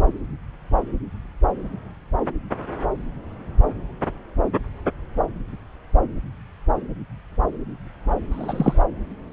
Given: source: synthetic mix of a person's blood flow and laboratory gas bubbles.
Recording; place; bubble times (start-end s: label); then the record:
Doppler ultrasound of blood flow; subclavian vein
8.31-8.81 s: bubbles
From the record:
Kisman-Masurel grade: 113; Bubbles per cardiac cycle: 1 to 2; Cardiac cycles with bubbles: 1 to 10%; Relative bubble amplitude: loud (0.450 to 0.775); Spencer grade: 1 (occasional bubble signal discernible with the cardiac motion signal, with majority of cardiac periods free of bubbles); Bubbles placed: anywhere in the cardiac cycle